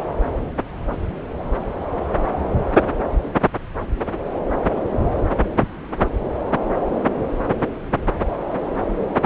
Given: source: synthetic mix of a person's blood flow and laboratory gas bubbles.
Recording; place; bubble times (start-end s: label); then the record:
Doppler ultrasound of blood flow; subclavian vein
no bubbles
From the record:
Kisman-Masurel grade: 000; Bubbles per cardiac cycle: 0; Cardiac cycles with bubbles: 0%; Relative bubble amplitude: no bubbles discernible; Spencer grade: 0 (complete lack of bubble signals)